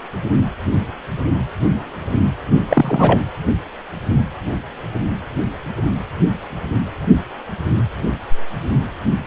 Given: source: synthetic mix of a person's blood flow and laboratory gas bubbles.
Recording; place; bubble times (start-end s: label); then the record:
Doppler ultrasound of blood flow; precordium
2.47-2.65 s: bubbles
2.69-3.24 s: bubbles
From the record:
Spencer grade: 1 (occasional bubble signal discernible with the cardiac motion signal, with majority of cardiac periods free of bubbles); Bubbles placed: anywhere in the cardiac cycle